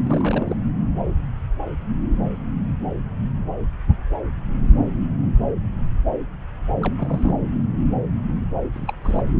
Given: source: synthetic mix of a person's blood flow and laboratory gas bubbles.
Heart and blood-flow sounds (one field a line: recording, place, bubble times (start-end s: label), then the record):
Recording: Doppler ultrasound of blood flow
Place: subclavian vein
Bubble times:
0.04-0.56 s: bubbles
6.80-6.93 s: bubbles
6.97-7.35 s: bubbles
8.73-8.94 s: bubbles
9.04-9.23 s: bubbles
From the record:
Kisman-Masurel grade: 221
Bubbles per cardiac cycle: several, 3 to 8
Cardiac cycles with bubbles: 10 to 50%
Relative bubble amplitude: barely perceptible (0.100 to 0.250)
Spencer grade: 2 (many but less than half of the cardiac periods contain bubble signals, singularly or in groups)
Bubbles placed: anywhere in the cardiac cycle